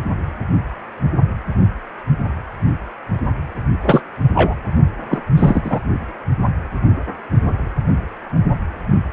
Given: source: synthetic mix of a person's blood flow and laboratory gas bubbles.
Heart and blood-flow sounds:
Doppler ultrasound of blood flow; precordium
3.83-4.00 s: bubbles
4.34-4.54 s: bubbles
5.10-5.19 s: bubbles
5.36-5.79 s: bubbles
From the record:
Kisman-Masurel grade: 223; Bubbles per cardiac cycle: several, 3 to 8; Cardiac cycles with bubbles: 10 to 50%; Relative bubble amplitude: loud (0.450 to 0.775); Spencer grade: 2 (many but less than half of the cardiac periods contain bubble signals, singularly or in groups); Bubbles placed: only in the low amplitude regions of the cardiac cycle

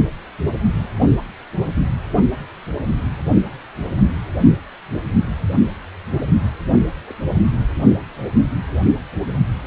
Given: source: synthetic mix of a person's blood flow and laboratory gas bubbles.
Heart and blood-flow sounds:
Doppler ultrasound of blood flow; precordium
7.07-7.13 s: bubbles
From the record:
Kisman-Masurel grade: 111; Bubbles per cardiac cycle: 1 to 2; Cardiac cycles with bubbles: 1 to 10%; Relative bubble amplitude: barely perceptible (0.100 to 0.250); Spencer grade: 1 (occasional bubble signal discernible with the cardiac motion signal, with majority of cardiac periods free of bubbles); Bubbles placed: only in the low amplitude regions of the cardiac cycle

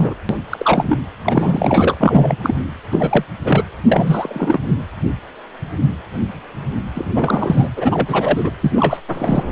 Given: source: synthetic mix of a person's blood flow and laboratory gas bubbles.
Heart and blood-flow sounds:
Doppler ultrasound of blood flow; precordium
0.00-0.14 s: bubbles
0.29-0.38 s: bubbles
0.49-0.97 s: bubbles
1.24-2.36 s: bubbles
2.43-2.55 s: bubbles
2.92-3.24 s: bubbles
3.41-3.63 s: bubbles
3.86-4.76 s: bubbles
6.94-7.69 s: bubbles
7.76-8.51 s: bubbles
8.61-8.71 s: bubbles
8.75-8.97 s: bubbles
9.12-9.44 s: bubbles
From the record:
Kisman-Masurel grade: 333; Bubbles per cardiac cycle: rolling drumbeat, 9 or more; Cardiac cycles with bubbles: 50 to 99%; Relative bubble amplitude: loud (0.450 to 0.775); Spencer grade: 3 (all of the cardiac periods contain showers or single bubble signals, but not dominating or overriding the cardiac motion signals); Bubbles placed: anywhere in the cardiac cycle

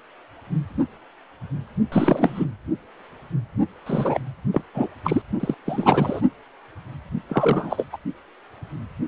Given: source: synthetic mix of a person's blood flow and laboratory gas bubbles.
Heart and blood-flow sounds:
Doppler ultrasound of blood flow; precordium
1.92-2.44 s: bubbles
3.86-4.21 s: bubbles
4.52-4.62 s: bubbles
4.73-4.88 s: bubbles
5.04-5.22 s: bubbles
5.39-5.54 s: bubbles
5.65-6.21 s: bubbles
7.29-7.86 s: bubbles
7.92-7.98 s: bubbles
From the record:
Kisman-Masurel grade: 223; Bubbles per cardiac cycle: several, 3 to 8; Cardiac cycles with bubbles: 10 to 50%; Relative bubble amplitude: loud (0.450 to 0.775); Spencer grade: 2 (many but less than half of the cardiac periods contain bubble signals, singularly or in groups); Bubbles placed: only in the low amplitude regions of the cardiac cycle

